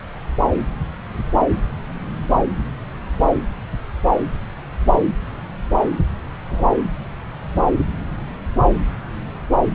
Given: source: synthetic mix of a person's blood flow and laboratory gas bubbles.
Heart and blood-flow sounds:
Doppler ultrasound of blood flow; subclavian vein
6.49-6.66 s: bubbles
From the record:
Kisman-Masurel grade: 112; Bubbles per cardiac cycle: 1 to 2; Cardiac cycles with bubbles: 1 to 10%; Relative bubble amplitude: moderate (0.250 to 0.450); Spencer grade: 1 (occasional bubble signal discernible with the cardiac motion signal, with majority of cardiac periods free of bubbles); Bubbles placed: anywhere in the cardiac cycle

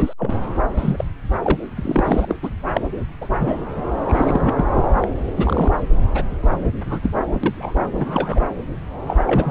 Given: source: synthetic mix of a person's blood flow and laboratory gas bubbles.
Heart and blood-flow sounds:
Doppler ultrasound of blood flow; subclavian vein
0.00-0.14 s: bubbles
0.18-0.35 s: bubbles
0.77-1.04 s: bubbles
1.44-1.61 s: bubbles
1.65-2.25 s: bubbles
2.29-2.37 s: bubbles
2.42-2.50 s: bubbles
2.74-2.81 s: bubbles
3.21-3.28 s: bubbles
3.39-3.63 s: bubbles
3.76-3.85 s: bubbles
4.08-4.64 s: bubbles
5.00-5.10 s: bubbles
5.37-5.71 s: bubbles
6.14-6.23 s: bubbles
6.42-6.48 s: bubbles
6.85-7.00 s: bubbles
7.03-7.09 s: bubbles
7.43-7.74 s: bubbles
7.96-8.40 s: bubbles
9.07-9.16 s: bubbles
9.27-9.51 s: bubbles
From the record:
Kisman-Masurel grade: 242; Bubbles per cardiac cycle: several, 3 to 8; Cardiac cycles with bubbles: 100%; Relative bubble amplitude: moderate (0.250 to 0.450); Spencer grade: 3 (all of the cardiac periods contain showers or single bubble signals, but not dominating or overriding the cardiac motion signals); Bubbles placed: anywhere in the cardiac cycle

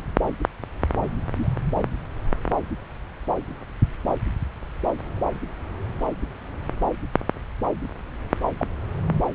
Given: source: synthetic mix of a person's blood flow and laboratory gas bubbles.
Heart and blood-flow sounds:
Doppler ultrasound of blood flow; subclavian vein
1.34-1.48 s: bubbles
8.58-8.65 s: bubbles
From the record:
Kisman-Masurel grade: 111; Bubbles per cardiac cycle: 1 to 2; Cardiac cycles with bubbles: 1 to 10%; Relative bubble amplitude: barely perceptible (0.100 to 0.250); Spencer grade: 1 (occasional bubble signal discernible with the cardiac motion signal, with majority of cardiac periods free of bubbles); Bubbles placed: anywhere in the cardiac cycle

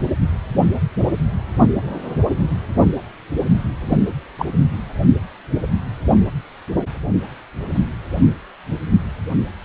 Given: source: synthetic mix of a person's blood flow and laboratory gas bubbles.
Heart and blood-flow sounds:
Doppler ultrasound of blood flow; precordium
3.90-3.98 s: bubbles
4.39-4.46 s: bubbles
From the record:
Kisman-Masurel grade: 113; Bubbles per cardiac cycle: 1 to 2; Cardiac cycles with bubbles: 1 to 10%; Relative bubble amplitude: loud (0.450 to 0.775); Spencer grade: 1 (occasional bubble signal discernible with the cardiac motion signal, with majority of cardiac periods free of bubbles); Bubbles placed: anywhere in the cardiac cycle

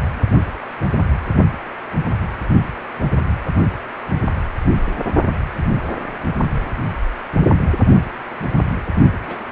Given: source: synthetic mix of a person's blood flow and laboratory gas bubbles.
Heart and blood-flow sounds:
Doppler ultrasound of blood flow; precordium
9.27-9.49 s: bubbles
From the record:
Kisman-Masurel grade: 121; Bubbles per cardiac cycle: 1 to 2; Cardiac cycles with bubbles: 10 to 50%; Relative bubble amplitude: barely perceptible (0.100 to 0.250); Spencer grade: 2 (many but less than half of the cardiac periods contain bubble signals, singularly or in groups); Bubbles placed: only in the low amplitude regions of the cardiac cycle

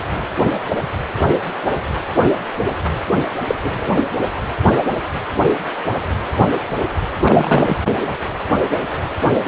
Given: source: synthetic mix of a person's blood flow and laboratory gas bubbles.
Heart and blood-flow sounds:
Doppler ultrasound of blood flow; precordium
3.47-3.55 s: bubbles
3.63-3.92 s: bubbles
7.23-7.77 s: bubbles
From the record:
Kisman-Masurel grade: 122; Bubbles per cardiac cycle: 1 to 2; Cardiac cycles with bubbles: 10 to 50%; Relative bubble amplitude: moderate (0.250 to 0.450); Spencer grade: 2 (many but less than half of the cardiac periods contain bubble signals, singularly or in groups); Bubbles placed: anywhere in the cardiac cycle

